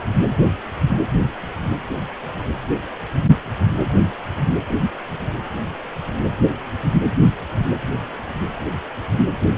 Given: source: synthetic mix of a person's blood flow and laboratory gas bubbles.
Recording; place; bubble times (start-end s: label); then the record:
Doppler ultrasound of blood flow; precordium
no bubbles
From the record:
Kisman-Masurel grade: 000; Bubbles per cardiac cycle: 0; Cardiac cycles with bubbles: 0%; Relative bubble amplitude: no bubbles discernible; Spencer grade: 0 (complete lack of bubble signals)